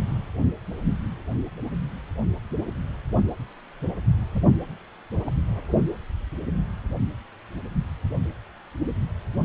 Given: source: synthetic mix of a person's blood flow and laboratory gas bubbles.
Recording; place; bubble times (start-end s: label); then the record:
Doppler ultrasound of blood flow; precordium
4.33-4.43 s: bubbles
5.26-5.41 s: bubbles
From the record:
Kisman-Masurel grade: 211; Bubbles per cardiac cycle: several, 3 to 8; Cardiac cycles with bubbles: 1 to 10%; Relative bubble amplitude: barely perceptible (0.100 to 0.250); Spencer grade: 1 (occasional bubble signal discernible with the cardiac motion signal, with majority of cardiac periods free of bubbles); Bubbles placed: anywhere in the cardiac cycle